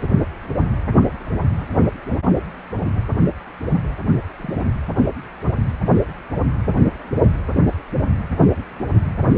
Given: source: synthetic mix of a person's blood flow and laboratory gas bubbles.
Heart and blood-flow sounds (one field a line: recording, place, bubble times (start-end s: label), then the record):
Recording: Doppler ultrasound of blood flow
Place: precordium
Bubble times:
4.38-4.74 s: bubbles
From the record:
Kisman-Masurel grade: 111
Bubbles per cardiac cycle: 1 to 2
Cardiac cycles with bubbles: 1 to 10%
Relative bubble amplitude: barely perceptible (0.100 to 0.250)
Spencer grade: 1 (occasional bubble signal discernible with the cardiac motion signal, with majority of cardiac periods free of bubbles)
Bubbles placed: only in the low amplitude regions of the cardiac cycle